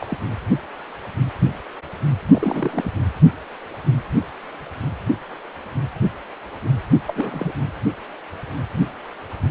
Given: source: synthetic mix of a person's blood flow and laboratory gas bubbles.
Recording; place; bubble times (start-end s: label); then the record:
Doppler ultrasound of blood flow; precordium
0.00-0.17 s: bubbles
0.24-0.29 s: bubbles
2.29-2.92 s: bubbles
7.07-7.52 s: bubbles
From the record:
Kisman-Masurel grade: 221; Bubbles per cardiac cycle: several, 3 to 8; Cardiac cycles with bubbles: 10 to 50%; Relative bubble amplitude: barely perceptible (0.100 to 0.250); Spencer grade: 2 (many but less than half of the cardiac periods contain bubble signals, singularly or in groups); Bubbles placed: anywhere in the cardiac cycle